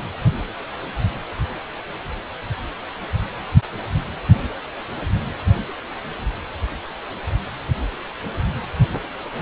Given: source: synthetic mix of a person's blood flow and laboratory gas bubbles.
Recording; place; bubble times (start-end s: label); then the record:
Doppler ultrasound of blood flow; precordium
no bubbles
From the record:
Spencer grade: 0 (complete lack of bubble signals)